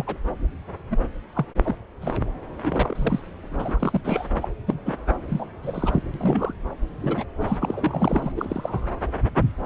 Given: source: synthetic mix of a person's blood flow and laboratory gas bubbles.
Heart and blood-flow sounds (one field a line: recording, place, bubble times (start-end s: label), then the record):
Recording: Doppler ultrasound of blood flow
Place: subclavian vein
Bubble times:
0.00-0.17 s: bubbles
0.90-0.98 s: bubbles
1.34-1.46 s: bubbles
1.64-1.76 s: bubbles
2.01-2.14 s: bubbles
2.64-3.20 s: bubbles
3.50-4.01 s: bubbles
4.04-4.28 s: bubbles
4.42-4.49 s: bubbles
4.66-4.81 s: bubbles
4.85-4.97 s: bubbles
5.29-5.46 s: bubbles
5.62-6.03 s: bubbles
6.14-6.54 s: bubbles
7.00-7.24 s: bubbles
7.40-7.57 s: bubbles
7.60-8.32 s: bubbles
8.36-8.88 s: bubbles
From the record:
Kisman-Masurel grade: 243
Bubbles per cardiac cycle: several, 3 to 8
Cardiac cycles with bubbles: 100%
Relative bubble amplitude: loud (0.450 to 0.775)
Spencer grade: 3 (all of the cardiac periods contain showers or single bubble signals, but not dominating or overriding the cardiac motion signals)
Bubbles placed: anywhere in the cardiac cycle